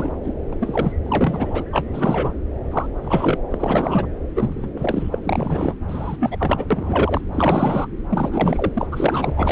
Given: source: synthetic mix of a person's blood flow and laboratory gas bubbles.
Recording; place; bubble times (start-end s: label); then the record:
Doppler ultrasound of blood flow; subclavian vein
0.00-0.12 s: bubbles
0.23-0.32 s: bubbles
0.53-0.55 s: bubbles
0.60-0.93 s: bubbles
1.04-1.64 s: bubbles
1.73-2.33 s: bubbles
2.71-2.87 s: bubbles
3.03-3.38 s: bubbles
3.51-4.07 s: bubbles
4.35-4.69 s: bubbles
4.76-5.09 s: bubbles
5.12-5.19 s: bubbles
5.23-5.74 s: bubbles
5.88-6.36 s: bubbles
6.39-6.65 s: bubbles
6.71-7.21 s: bubbles
7.33-7.87 s: bubbles
8.11-8.71 s: bubbles
8.74-8.87 s: bubbles
8.92-9.33 s: bubbles
9.36-9.52 s: bubbles
From the record:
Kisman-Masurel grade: 342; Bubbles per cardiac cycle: rolling drumbeat, 9 or more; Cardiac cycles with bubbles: 100%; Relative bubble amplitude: moderate (0.250 to 0.450); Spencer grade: 3 (all of the cardiac periods contain showers or single bubble signals, but not dominating or overriding the cardiac motion signals); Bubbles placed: anywhere in the cardiac cycle